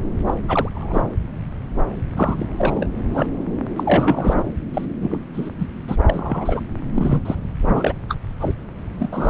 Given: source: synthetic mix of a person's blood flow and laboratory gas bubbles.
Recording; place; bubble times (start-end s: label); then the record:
Doppler ultrasound of blood flow; subclavian vein
0.00-0.02 s: bubbles
0.27-0.34 s: bubbles
0.47-0.69 s: bubbles
0.74-1.02 s: bubbles
2.17-2.46 s: bubbles
2.58-2.87 s: bubbles
3.12-3.26 s: bubbles
3.76-4.43 s: bubbles
4.73-4.85 s: bubbles
5.00-5.18 s: bubbles
5.33-5.50 s: bubbles
5.58-5.67 s: bubbles
5.88-5.96 s: bubbles
6.06-6.60 s: bubbles
6.95-7.21 s: bubbles
7.25-7.35 s: bubbles
7.65-7.92 s: bubbles
8.09-8.16 s: bubbles
8.40-8.54 s: bubbles
8.99-9.09 s: bubbles
9.12-9.30 s: bubbles
From the record:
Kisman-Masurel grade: 232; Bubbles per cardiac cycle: several, 3 to 8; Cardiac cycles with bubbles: 50 to 99%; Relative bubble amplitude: moderate (0.250 to 0.450); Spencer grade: 3 (all of the cardiac periods contain showers or single bubble signals, but not dominating or overriding the cardiac motion signals); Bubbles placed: anywhere in the cardiac cycle